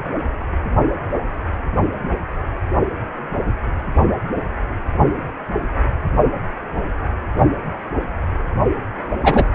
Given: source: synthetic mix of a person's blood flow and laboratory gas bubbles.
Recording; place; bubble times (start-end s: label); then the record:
Doppler ultrasound of blood flow; precordium
9.23-9.48 s: bubbles
From the record:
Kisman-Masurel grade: 113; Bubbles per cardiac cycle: 1 to 2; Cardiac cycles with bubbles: 1 to 10%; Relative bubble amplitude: loud (0.450 to 0.775); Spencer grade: 1 (occasional bubble signal discernible with the cardiac motion signal, with majority of cardiac periods free of bubbles); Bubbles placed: only in the low amplitude regions of the cardiac cycle